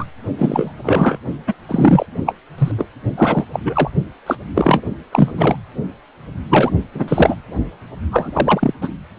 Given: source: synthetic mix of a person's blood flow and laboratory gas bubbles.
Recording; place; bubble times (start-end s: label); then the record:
Doppler ultrasound of blood flow; precordium
0.00-0.05 s: bubbles
0.38-0.72 s: bubbles
0.82-1.18 s: bubbles
1.46-1.54 s: bubbles
1.68-2.06 s: bubbles
2.26-2.35 s: bubbles
2.58-2.72 s: bubbles
2.78-2.87 s: bubbles
3.17-3.45 s: bubbles
3.53-3.60 s: bubbles
3.65-3.90 s: bubbles
4.26-4.36 s: bubbles
4.54-4.81 s: bubbles
5.11-5.56 s: bubbles
6.50-6.71 s: bubbles
6.94-7.35 s: bubbles
8.12-8.73 s: bubbles
8.81-8.88 s: bubbles
From the record:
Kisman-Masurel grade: 233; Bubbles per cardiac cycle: several, 3 to 8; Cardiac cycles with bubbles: 50 to 99%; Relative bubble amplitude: loud (0.450 to 0.775); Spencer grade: 3 (all of the cardiac periods contain showers or single bubble signals, but not dominating or overriding the cardiac motion signals); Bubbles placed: only in the low amplitude regions of the cardiac cycle